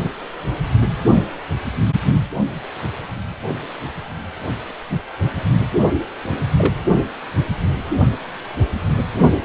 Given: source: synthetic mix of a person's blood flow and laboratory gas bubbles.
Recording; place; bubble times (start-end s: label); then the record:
Doppler ultrasound of blood flow; precordium
6.22-6.36 s: bubbles
6.57-6.74 s: bubbles
From the record:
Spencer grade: 1 (occasional bubble signal discernible with the cardiac motion signal, with majority of cardiac periods free of bubbles); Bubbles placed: only in the low amplitude regions of the cardiac cycle